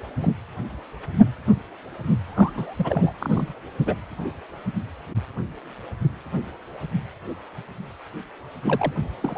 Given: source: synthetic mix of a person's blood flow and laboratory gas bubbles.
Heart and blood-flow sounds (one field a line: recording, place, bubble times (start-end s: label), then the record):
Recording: Doppler ultrasound of blood flow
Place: precordium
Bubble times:
0.20-0.32 s: bubbles
2.27-2.75 s: bubbles
2.78-3.12 s: bubbles
3.20-3.52 s: bubbles
3.86-3.94 s: bubbles
8.62-8.93 s: bubbles
9.20-9.38 s: bubbles
From the record:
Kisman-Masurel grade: 221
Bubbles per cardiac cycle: several, 3 to 8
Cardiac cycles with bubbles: 10 to 50%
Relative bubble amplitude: barely perceptible (0.100 to 0.250)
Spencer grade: 2 (many but less than half of the cardiac periods contain bubble signals, singularly or in groups)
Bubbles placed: anywhere in the cardiac cycle